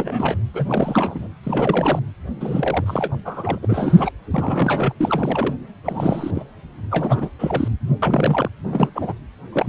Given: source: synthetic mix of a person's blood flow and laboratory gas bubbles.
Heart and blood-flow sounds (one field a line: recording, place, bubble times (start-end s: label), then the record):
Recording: Doppler ultrasound of blood flow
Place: precordium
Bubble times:
0.00-0.37 s: bubbles
0.54-1.27 s: bubbles
1.43-1.99 s: bubbles
2.40-3.16 s: bubbles
3.25-3.58 s: bubbles
3.62-4.12 s: bubbles
4.30-4.93 s: bubbles
5.00-5.54 s: bubbles
5.84-6.44 s: bubbles
6.91-7.30 s: bubbles
7.39-7.68 s: bubbles
8.02-8.49 s: bubbles
8.64-8.90 s: bubbles
8.95-9.13 s: bubbles
9.53-9.69 s: bubbles
From the record:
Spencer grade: 3 (all of the cardiac periods contain showers or single bubble signals, but not dominating or overriding the cardiac motion signals)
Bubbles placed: anywhere in the cardiac cycle